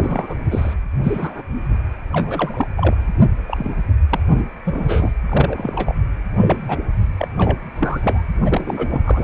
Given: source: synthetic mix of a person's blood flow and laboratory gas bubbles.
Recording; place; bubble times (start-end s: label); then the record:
Doppler ultrasound of blood flow; precordium
0.00-0.38 s: bubbles
0.51-0.74 s: bubbles
1.03-1.43 s: bubbles
2.12-2.67 s: bubbles
2.76-2.96 s: bubbles
3.23-3.28 s: bubbles
3.47-3.71 s: bubbles
4.11-4.20 s: bubbles
4.28-4.41 s: bubbles
4.65-5.12 s: bubbles
5.28-5.95 s: bubbles
6.36-6.76 s: bubbles
7.17-7.28 s: bubbles
7.38-7.60 s: bubbles
7.76-8.23 s: bubbles
8.43-9.01 s: bubbles
9.04-9.24 s: bubbles
From the record:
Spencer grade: 3 (all of the cardiac periods contain showers or single bubble signals, but not dominating or overriding the cardiac motion signals); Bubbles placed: anywhere in the cardiac cycle